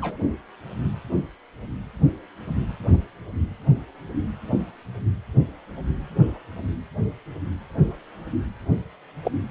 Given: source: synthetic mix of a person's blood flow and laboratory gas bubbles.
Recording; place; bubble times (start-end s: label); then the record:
Doppler ultrasound of blood flow; precordium
0.00-0.17 s: bubbles
9.25-9.31 s: bubbles
From the record:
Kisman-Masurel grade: 122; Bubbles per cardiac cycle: 1 to 2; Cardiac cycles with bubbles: 10 to 50%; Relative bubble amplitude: moderate (0.250 to 0.450); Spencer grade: 2 (many but less than half of the cardiac periods contain bubble signals, singularly or in groups); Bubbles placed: only in the low amplitude regions of the cardiac cycle